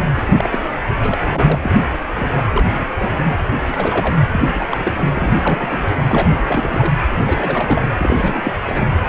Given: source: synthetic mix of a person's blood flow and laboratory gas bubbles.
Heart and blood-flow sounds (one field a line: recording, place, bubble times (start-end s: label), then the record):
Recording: Doppler ultrasound of blood flow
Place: precordium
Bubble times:
0.00-0.04 s: bubbles
0.16-0.26 s: bubbles
0.28-0.34 s: bubbles
0.36-0.64 s: bubbles
1.02-1.19 s: bubbles
1.26-1.77 s: bubbles
2.16-2.28 s: bubbles
2.31-2.67 s: bubbles
2.73-2.85 s: bubbles
2.98-3.20 s: bubbles
3.25-3.37 s: bubbles
3.69-4.18 s: bubbles
4.32-5.09 s: bubbles
5.15-5.81 s: bubbles
5.87-5.92 s: bubbles
6.07-6.30 s: bubbles
6.35-6.40 s: bubbles
6.47-6.92 s: bubbles
7.21-7.91 s: bubbles
7.97-8.53 s: bubbles
8.65-8.94 s: bubbles
From the record:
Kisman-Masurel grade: 342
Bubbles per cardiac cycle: rolling drumbeat, 9 or more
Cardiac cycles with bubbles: 100%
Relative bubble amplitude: moderate (0.250 to 0.450)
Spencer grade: 3 (all of the cardiac periods contain showers or single bubble signals, but not dominating or overriding the cardiac motion signals)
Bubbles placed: anywhere in the cardiac cycle